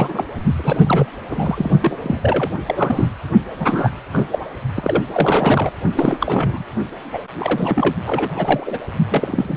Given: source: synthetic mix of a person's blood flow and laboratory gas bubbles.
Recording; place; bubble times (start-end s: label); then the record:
Doppler ultrasound of blood flow; precordium
0.00-0.24 s: bubbles
0.57-1.06 s: bubbles
1.30-1.71 s: bubbles
1.82-1.97 s: bubbles
2.02-2.50 s: bubbles
2.67-3.08 s: bubbles
3.59-3.91 s: bubbles
4.12-4.26 s: bubbles
4.31-4.38 s: bubbles
4.75-5.04 s: bubbles
5.13-5.72 s: bubbles
5.95-6.64 s: bubbles
7.12-7.23 s: bubbles
7.39-7.95 s: bubbles
8.05-8.79 s: bubbles
9.10-9.57 s: bubbles
From the record:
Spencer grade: 3 (all of the cardiac periods contain showers or single bubble signals, but not dominating or overriding the cardiac motion signals); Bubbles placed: only in the low amplitude regions of the cardiac cycle